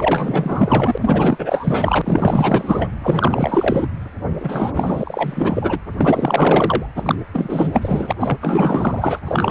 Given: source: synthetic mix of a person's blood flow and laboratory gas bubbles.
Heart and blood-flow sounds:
Doppler ultrasound of blood flow; precordium
0.00-0.98 s: bubbles
1.00-2.95 s: bubbles
3.02-3.87 s: bubbles
4.40-5.79 s: bubbles
6.00-6.86 s: bubbles
6.95-7.15 s: bubbles
7.33-8.12 s: bubbles
8.20-8.38 s: bubbles
8.41-9.19 s: bubbles
9.25-9.51 s: bubbles
From the record:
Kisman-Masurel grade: 444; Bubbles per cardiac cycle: continuous sound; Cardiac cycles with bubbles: 100%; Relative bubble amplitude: maximal (0.775 to 0.999); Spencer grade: 4 (maximum detectable bubble signal sounding continuously throughout systole and diastole of every cardiac period, and overriding the amplitude of the normal cardiac signals); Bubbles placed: anywhere in the cardiac cycle

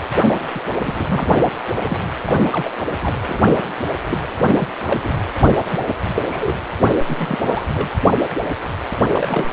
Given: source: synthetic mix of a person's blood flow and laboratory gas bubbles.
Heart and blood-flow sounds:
Doppler ultrasound of blood flow; precordium
0.00-0.03 s: bubbles
0.27-0.34 s: bubbles
0.55-0.61 s: bubbles
0.83-1.31 s: bubbles
1.42-1.47 s: bubbles
1.80-1.99 s: bubbles
2.22-2.35 s: bubbles
2.52-2.70 s: bubbles
3.02-3.17 s: bubbles
3.27-3.71 s: bubbles
4.09-4.18 s: bubbles
4.46-4.54 s: bubbles
4.56-4.68 s: bubbles
4.87-5.01 s: bubbles
5.04-5.14 s: bubbles
5.71-5.79 s: bubbles
6.25-6.62 s: bubbles
6.77-6.94 s: bubbles
7.08-7.41 s: bubbles
7.43-7.64 s: bubbles
7.73-7.89 s: bubbles
9.14-9.52 s: bubbles
From the record:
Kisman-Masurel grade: 232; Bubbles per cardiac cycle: several, 3 to 8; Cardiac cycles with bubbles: 50 to 99%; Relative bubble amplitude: moderate (0.250 to 0.450); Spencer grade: 3 (all of the cardiac periods contain showers or single bubble signals, but not dominating or overriding the cardiac motion signals); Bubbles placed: anywhere in the cardiac cycle

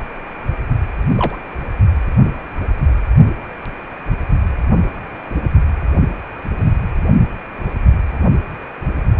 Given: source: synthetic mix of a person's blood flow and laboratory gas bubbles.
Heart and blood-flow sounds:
Doppler ultrasound of blood flow; precordium
1.16-1.35 s: bubbles
From the record:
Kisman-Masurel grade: 112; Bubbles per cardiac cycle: 1 to 2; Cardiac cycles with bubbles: 1 to 10%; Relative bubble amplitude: moderate (0.250 to 0.450); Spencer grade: 1 (occasional bubble signal discernible with the cardiac motion signal, with majority of cardiac periods free of bubbles); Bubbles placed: only in the low amplitude regions of the cardiac cycle

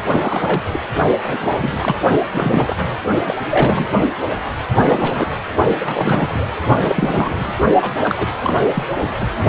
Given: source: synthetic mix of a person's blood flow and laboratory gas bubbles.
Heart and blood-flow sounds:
Doppler ultrasound of blood flow; precordium
0.09-0.62 s: bubbles
0.72-0.80 s: bubbles
1.24-1.96 s: bubbles
2.31-2.88 s: bubbles
3.25-3.36 s: bubbles
3.50-3.88 s: bubbles
3.91-4.05 s: bubbles
4.81-5.38 s: bubbles
5.65-5.74 s: bubbles
5.79-6.50 s: bubbles
6.77-7.54 s: bubbles
7.81-7.91 s: bubbles
8.04-8.32 s: bubbles
8.42-8.67 s: bubbles
8.74-8.83 s: bubbles
8.99-9.13 s: bubbles
9.20-9.27 s: bubbles
From the record:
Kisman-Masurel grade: 342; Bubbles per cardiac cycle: rolling drumbeat, 9 or more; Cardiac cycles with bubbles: 100%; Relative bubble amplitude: moderate (0.250 to 0.450); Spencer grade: 3 (all of the cardiac periods contain showers or single bubble signals, but not dominating or overriding the cardiac motion signals); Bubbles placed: only in the low amplitude regions of the cardiac cycle

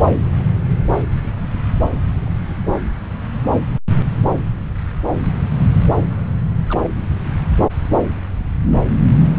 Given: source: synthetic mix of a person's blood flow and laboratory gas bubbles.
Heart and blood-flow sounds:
Doppler ultrasound of blood flow; subclavian vein
6.69-6.90 s: bubbles
From the record:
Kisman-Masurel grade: 111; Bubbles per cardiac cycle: 1 to 2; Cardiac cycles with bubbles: 1 to 10%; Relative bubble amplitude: barely perceptible (0.100 to 0.250); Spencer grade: 1 (occasional bubble signal discernible with the cardiac motion signal, with majority of cardiac periods free of bubbles); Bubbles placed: anywhere in the cardiac cycle

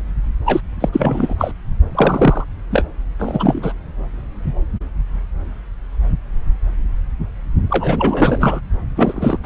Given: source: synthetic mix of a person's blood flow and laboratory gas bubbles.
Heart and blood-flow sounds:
Doppler ultrasound of blood flow; subclavian vein
0.45-0.60 s: bubbles
0.80-0.89 s: bubbles
0.92-1.35 s: bubbles
1.39-1.52 s: bubbles
1.94-2.44 s: bubbles
2.70-2.85 s: bubbles
3.19-3.73 s: bubbles
7.70-8.60 s: bubbles
8.96-9.39 s: bubbles
9.43-9.46 s: bubbles
From the record:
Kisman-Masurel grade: 333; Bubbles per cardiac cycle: rolling drumbeat, 9 or more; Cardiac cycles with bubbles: 50 to 99%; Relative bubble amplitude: loud (0.450 to 0.775); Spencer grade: 3 (all of the cardiac periods contain showers or single bubble signals, but not dominating or overriding the cardiac motion signals); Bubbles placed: anywhere in the cardiac cycle

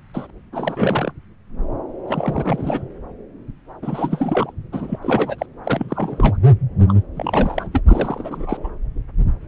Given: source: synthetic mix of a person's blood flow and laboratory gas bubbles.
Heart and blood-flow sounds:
Doppler ultrasound of blood flow; subclavian vein
0.14-0.26 s: bubbles
0.53-1.11 s: bubbles
2.07-2.84 s: bubbles
3.82-4.51 s: bubbles
4.72-4.99 s: bubbles
5.02-5.46 s: bubbles
5.64-6.37 s: bubbles
6.88-6.95 s: bubbles
7.16-7.67 s: bubbles
7.72-7.81 s: bubbles
7.88-8.70 s: bubbles
From the record:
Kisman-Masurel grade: 332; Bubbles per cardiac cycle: rolling drumbeat, 9 or more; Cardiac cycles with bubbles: 50 to 99%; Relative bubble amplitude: moderate (0.250 to 0.450); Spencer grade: 3 (all of the cardiac periods contain showers or single bubble signals, but not dominating or overriding the cardiac motion signals); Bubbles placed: anywhere in the cardiac cycle

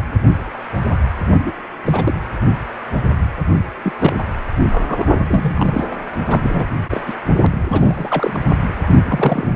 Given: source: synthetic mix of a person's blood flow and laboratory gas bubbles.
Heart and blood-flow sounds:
Doppler ultrasound of blood flow; precordium
1.33-1.53 s: bubbles
1.84-2.14 s: bubbles
3.83-3.92 s: bubbles
4.00-4.15 s: bubbles
4.71-5.18 s: bubbles
5.27-5.85 s: bubbles
5.91-5.96 s: bubbles
6.29-6.67 s: bubbles
6.91-7.04 s: bubbles
7.07-7.14 s: bubbles
7.25-7.46 s: bubbles
7.67-8.39 s: bubbles
8.75-9.00 s: bubbles
9.05-9.47 s: bubbles
From the record:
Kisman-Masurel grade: 232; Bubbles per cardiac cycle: several, 3 to 8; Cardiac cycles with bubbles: 50 to 99%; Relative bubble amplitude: moderate (0.250 to 0.450); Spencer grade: 3 (all of the cardiac periods contain showers or single bubble signals, but not dominating or overriding the cardiac motion signals); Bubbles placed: anywhere in the cardiac cycle

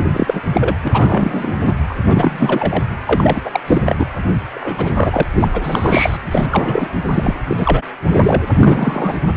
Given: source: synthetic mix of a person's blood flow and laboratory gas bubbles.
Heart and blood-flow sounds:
Doppler ultrasound of blood flow; precordium
0.00-0.07 s: bubbles
0.13-0.41 s: bubbles
0.53-0.76 s: bubbles
0.83-1.74 s: bubbles
1.89-1.94 s: bubbles
2.07-2.84 s: bubbles
3.06-3.60 s: bubbles
3.66-3.95 s: bubbles
3.98-4.10 s: bubbles
4.54-5.24 s: bubbles
5.35-6.18 s: bubbles
6.31-6.46 s: bubbles
6.50-6.90 s: bubbles
7.02-7.34 s: bubbles
7.47-7.83 s: bubbles
8.15-8.42 s: bubbles
8.59-9.21 s: bubbles
From the record:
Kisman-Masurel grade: 343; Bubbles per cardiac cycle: rolling drumbeat, 9 or more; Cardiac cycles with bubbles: 100%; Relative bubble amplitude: loud (0.450 to 0.775); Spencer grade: 3 (all of the cardiac periods contain showers or single bubble signals, but not dominating or overriding the cardiac motion signals); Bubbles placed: anywhere in the cardiac cycle

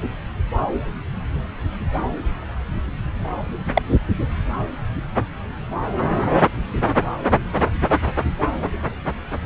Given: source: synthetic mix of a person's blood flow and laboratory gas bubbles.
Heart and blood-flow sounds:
Doppler ultrasound of blood flow; subclavian vein
3.73-3.82 s: bubbles
From the record:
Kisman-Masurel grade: 113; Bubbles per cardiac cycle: 1 to 2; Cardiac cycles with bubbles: 1 to 10%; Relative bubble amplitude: loud (0.450 to 0.775); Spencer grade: 1 (occasional bubble signal discernible with the cardiac motion signal, with majority of cardiac periods free of bubbles); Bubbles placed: anywhere in the cardiac cycle

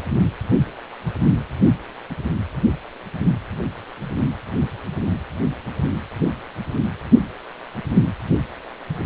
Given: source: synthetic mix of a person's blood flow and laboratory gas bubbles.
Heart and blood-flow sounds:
Doppler ultrasound of blood flow; precordium
no bubbles
From the record:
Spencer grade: 0 (complete lack of bubble signals)

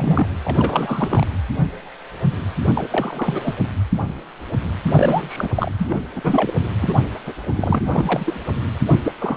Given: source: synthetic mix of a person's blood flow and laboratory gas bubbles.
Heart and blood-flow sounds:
Doppler ultrasound of blood flow; precordium
0.00-0.29 s: bubbles
0.44-1.26 s: bubbles
2.74-2.87 s: bubbles
2.91-3.54 s: bubbles
4.92-5.48 s: bubbles
5.55-5.71 s: bubbles
5.79-6.01 s: bubbles
6.15-6.53 s: bubbles
6.81-6.98 s: bubbles
7.26-7.33 s: bubbles
7.56-7.80 s: bubbles
7.87-8.44 s: bubbles
8.86-9.00 s: bubbles
9.04-9.12 s: bubbles
9.19-9.36 s: bubbles
From the record:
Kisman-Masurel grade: 332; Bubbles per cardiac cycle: rolling drumbeat, 9 or more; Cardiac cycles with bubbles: 50 to 99%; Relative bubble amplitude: moderate (0.250 to 0.450); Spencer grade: 3 (all of the cardiac periods contain showers or single bubble signals, but not dominating or overriding the cardiac motion signals); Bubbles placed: anywhere in the cardiac cycle

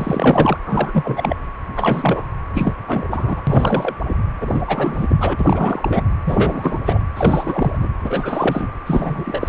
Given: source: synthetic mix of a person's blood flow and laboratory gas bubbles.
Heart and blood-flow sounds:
Doppler ultrasound of blood flow; precordium
0.00-0.57 s: bubbles
0.66-1.36 s: bubbles
1.76-2.26 s: bubbles
2.54-2.74 s: bubbles
2.87-3.07 s: bubbles
3.11-3.42 s: bubbles
3.47-3.95 s: bubbles
4.07-4.17 s: bubbles
4.41-4.61 s: bubbles
4.67-6.04 s: bubbles
6.25-6.78 s: bubbles
6.84-7.00 s: bubbles
7.16-7.78 s: bubbles
7.80-7.89 s: bubbles
8.04-8.69 s: bubbles
8.86-9.48 s: bubbles
From the record:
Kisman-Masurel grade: 343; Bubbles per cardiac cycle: rolling drumbeat, 9 or more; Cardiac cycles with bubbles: 100%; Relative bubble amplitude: loud (0.450 to 0.775); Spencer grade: 3 (all of the cardiac periods contain showers or single bubble signals, but not dominating or overriding the cardiac motion signals); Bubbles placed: anywhere in the cardiac cycle

